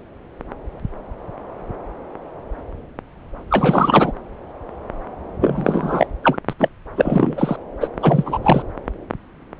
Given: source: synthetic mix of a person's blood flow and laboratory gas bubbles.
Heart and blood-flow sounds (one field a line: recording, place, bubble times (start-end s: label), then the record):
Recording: Doppler ultrasound of blood flow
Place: subclavian vein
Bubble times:
3.51-4.12 s: bubbles
5.40-6.06 s: bubbles
6.23-6.38 s: bubbles
6.50-6.54 s: bubbles
6.59-6.68 s: bubbles
6.96-7.56 s: bubbles
7.80-7.88 s: bubbles
8.00-8.38 s: bubbles
8.42-8.62 s: bubbles
From the record:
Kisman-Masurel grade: 233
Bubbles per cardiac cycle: several, 3 to 8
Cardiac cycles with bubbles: 50 to 99%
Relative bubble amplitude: loud (0.450 to 0.775)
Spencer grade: 3 (all of the cardiac periods contain showers or single bubble signals, but not dominating or overriding the cardiac motion signals)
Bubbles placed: anywhere in the cardiac cycle